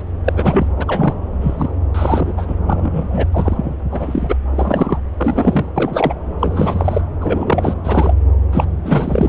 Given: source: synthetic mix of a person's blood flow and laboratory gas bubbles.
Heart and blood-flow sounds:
Doppler ultrasound of blood flow; subclavian vein
0.00-0.03 s: bubbles
0.24-0.67 s: bubbles
0.77-0.84 s: bubbles
0.87-1.14 s: bubbles
1.41-1.70 s: bubbles
1.94-2.32 s: bubbles
2.37-2.56 s: bubbles
2.67-3.26 s: bubbles
3.31-3.75 s: bubbles
3.91-4.37 s: bubbles
4.51-5.00 s: bubbles
5.17-5.69 s: bubbles
5.75-6.14 s: bubbles
6.39-7.01 s: bubbles
7.21-7.74 s: bubbles
7.83-8.15 s: bubbles
8.52-8.65 s: bubbles
8.82-9.29 s: bubbles
From the record:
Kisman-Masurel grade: 243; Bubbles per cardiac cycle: several, 3 to 8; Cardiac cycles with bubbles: 100%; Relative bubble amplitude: loud (0.450 to 0.775); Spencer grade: 3 (all of the cardiac periods contain showers or single bubble signals, but not dominating or overriding the cardiac motion signals); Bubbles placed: anywhere in the cardiac cycle

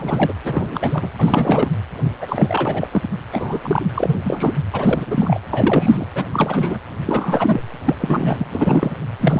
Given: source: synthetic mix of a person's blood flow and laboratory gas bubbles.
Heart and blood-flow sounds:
Doppler ultrasound of blood flow; precordium
0.00-0.33 s: bubbles
0.44-1.10 s: bubbles
1.19-1.69 s: bubbles
2.21-2.88 s: bubbles
2.92-3.02 s: bubbles
3.31-3.60 s: bubbles
3.64-3.86 s: bubbles
3.94-4.17 s: bubbles
4.22-4.54 s: bubbles
4.72-5.38 s: bubbles
5.51-6.06 s: bubbles
6.15-6.24 s: bubbles
6.32-6.79 s: bubbles
7.05-7.60 s: bubbles
7.85-7.96 s: bubbles
7.99-8.46 s: bubbles
8.51-8.93 s: bubbles
9.19-9.40 s: bubbles
From the record:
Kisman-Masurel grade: 342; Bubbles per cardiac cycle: rolling drumbeat, 9 or more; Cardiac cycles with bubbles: 100%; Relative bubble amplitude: moderate (0.250 to 0.450); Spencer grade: 3 (all of the cardiac periods contain showers or single bubble signals, but not dominating or overriding the cardiac motion signals); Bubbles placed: anywhere in the cardiac cycle

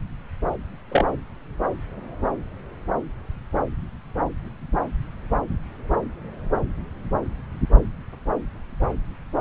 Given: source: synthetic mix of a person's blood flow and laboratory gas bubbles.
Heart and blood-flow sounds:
Doppler ultrasound of blood flow; subclavian vein
0.92-1.05 s: bubbles
From the record:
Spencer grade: 1 (occasional bubble signal discernible with the cardiac motion signal, with majority of cardiac periods free of bubbles); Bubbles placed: anywhere in the cardiac cycle

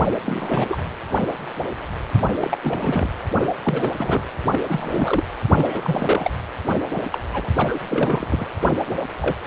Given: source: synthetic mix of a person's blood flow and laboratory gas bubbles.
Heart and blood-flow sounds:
Doppler ultrasound of blood flow; precordium
0.24-0.77 s: bubbles
2.28-2.58 s: bubbles
2.63-3.09 s: bubbles
3.38-3.51 s: bubbles
3.64-3.91 s: bubbles
3.96-4.23 s: bubbles
4.52-5.25 s: bubbles
5.49-6.31 s: bubbles
6.95-7.02 s: bubbles
7.12-7.20 s: bubbles
7.33-7.48 s: bubbles
7.56-7.79 s: bubbles
7.88-8.47 s: bubbles
8.65-8.74 s: bubbles
8.88-9.02 s: bubbles
9.21-9.36 s: bubbles
From the record:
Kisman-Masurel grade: 332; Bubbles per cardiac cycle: rolling drumbeat, 9 or more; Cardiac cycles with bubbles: 50 to 99%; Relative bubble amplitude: moderate (0.250 to 0.450); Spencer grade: 3 (all of the cardiac periods contain showers or single bubble signals, but not dominating or overriding the cardiac motion signals); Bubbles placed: anywhere in the cardiac cycle

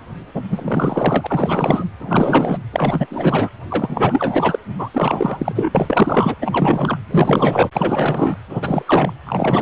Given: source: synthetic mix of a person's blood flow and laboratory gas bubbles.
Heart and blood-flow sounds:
Doppler ultrasound of blood flow; precordium
0.34-0.43 s: bubbles
0.49-1.85 s: bubbles
1.99-2.58 s: bubbles
2.72-3.06 s: bubbles
3.10-3.50 s: bubbles
3.70-4.59 s: bubbles
4.79-4.89 s: bubbles
4.93-5.52 s: bubbles
5.54-5.71 s: bubbles
5.75-6.34 s: bubbles
6.41-6.98 s: bubbles
7.11-7.70 s: bubbles
7.73-8.38 s: bubbles
8.49-9.13 s: bubbles
9.26-9.62 s: bubbles
From the record:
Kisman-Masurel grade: 444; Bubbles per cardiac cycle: continuous sound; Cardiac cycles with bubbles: 100%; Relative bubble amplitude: maximal (0.775 to 0.999); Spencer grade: 4 (maximum detectable bubble signal sounding continuously throughout systole and diastole of every cardiac period, and overriding the amplitude of the normal cardiac signals); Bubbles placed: anywhere in the cardiac cycle

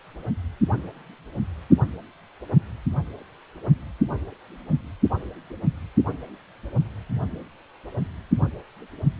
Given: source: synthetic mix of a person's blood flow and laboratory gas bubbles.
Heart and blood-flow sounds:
Doppler ultrasound of blood flow; precordium
no bubbles
From the record:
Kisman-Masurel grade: 000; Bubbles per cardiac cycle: 0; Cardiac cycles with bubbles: 0%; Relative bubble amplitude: no bubbles discernible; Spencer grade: 0 (complete lack of bubble signals)

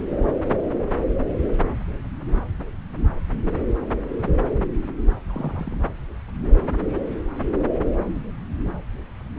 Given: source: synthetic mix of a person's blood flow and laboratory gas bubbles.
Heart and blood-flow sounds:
Doppler ultrasound of blood flow; subclavian vein
5.27-5.78 s: bubbles
8.12-8.23 s: bubbles
8.65-8.71 s: bubbles
From the record:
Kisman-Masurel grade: 111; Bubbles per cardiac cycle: 1 to 2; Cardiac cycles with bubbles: 1 to 10%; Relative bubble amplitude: barely perceptible (0.100 to 0.250); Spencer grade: 1 (occasional bubble signal discernible with the cardiac motion signal, with majority of cardiac periods free of bubbles); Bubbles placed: anywhere in the cardiac cycle

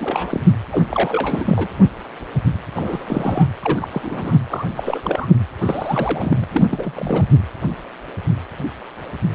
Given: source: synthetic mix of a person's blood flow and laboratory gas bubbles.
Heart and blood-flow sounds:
Doppler ultrasound of blood flow; precordium
0.00-0.40 s: bubbles
0.71-0.83 s: bubbles
0.90-1.67 s: bubbles
2.75-3.47 s: bubbles
3.62-3.88 s: bubbles
3.91-4.38 s: bubbles
4.50-4.65 s: bubbles
4.75-4.99 s: bubbles
5.04-5.28 s: bubbles
5.61-6.45 s: bubbles
6.51-6.66 s: bubbles
6.71-6.92 s: bubbles
6.96-7.28 s: bubbles
From the record:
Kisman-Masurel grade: 332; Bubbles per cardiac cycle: rolling drumbeat, 9 or more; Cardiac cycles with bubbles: 50 to 99%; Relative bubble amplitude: moderate (0.250 to 0.450); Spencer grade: 3 (all of the cardiac periods contain showers or single bubble signals, but not dominating or overriding the cardiac motion signals); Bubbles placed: anywhere in the cardiac cycle

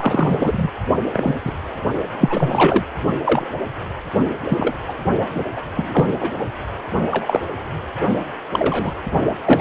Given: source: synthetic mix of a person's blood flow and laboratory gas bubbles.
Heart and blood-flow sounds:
Doppler ultrasound of blood flow; precordium
0.00-0.71 s: bubbles
1.12-1.34 s: bubbles
1.45-1.52 s: bubbles
2.18-2.84 s: bubbles
3.25-3.48 s: bubbles
4.49-4.74 s: bubbles
4.88-4.94 s: bubbles
5.34-5.44 s: bubbles
5.57-5.61 s: bubbles
5.76-6.15 s: bubbles
6.20-6.31 s: bubbles
6.39-6.45 s: bubbles
7.11-7.41 s: bubbles
8.52-8.94 s: bubbles
9.45-9.61 s: bubbles
From the record:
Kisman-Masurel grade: 243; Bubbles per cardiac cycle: several, 3 to 8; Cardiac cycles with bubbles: 100%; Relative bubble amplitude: loud (0.450 to 0.775); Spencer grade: 3 (all of the cardiac periods contain showers or single bubble signals, but not dominating or overriding the cardiac motion signals); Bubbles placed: only in the low amplitude regions of the cardiac cycle

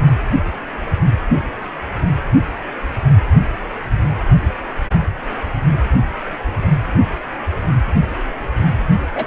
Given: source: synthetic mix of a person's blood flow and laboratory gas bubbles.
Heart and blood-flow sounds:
Doppler ultrasound of blood flow; precordium
9.15-9.25 s: bubbles
From the record:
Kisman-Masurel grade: 112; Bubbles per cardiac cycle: 1 to 2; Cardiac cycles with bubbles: 1 to 10%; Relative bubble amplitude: moderate (0.250 to 0.450); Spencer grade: 1 (occasional bubble signal discernible with the cardiac motion signal, with majority of cardiac periods free of bubbles); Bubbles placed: anywhere in the cardiac cycle

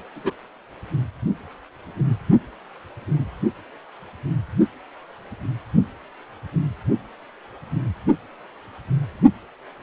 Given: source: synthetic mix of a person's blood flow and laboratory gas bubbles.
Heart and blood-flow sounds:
Doppler ultrasound of blood flow; precordium
0.15-0.32 s: bubbles
From the record:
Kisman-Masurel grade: 112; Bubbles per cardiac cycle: 1 to 2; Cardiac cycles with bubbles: 1 to 10%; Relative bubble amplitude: moderate (0.250 to 0.450); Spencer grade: 1 (occasional bubble signal discernible with the cardiac motion signal, with majority of cardiac periods free of bubbles); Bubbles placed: only in the low amplitude regions of the cardiac cycle

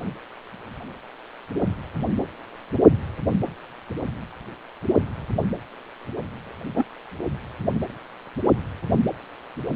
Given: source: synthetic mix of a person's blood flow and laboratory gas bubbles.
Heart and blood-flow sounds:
Doppler ultrasound of blood flow; precordium
6.76-6.84 s: bubbles
From the record:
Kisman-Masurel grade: 112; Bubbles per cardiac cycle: 1 to 2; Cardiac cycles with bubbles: 1 to 10%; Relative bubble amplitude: moderate (0.250 to 0.450); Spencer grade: 1 (occasional bubble signal discernible with the cardiac motion signal, with majority of cardiac periods free of bubbles); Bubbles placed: anywhere in the cardiac cycle

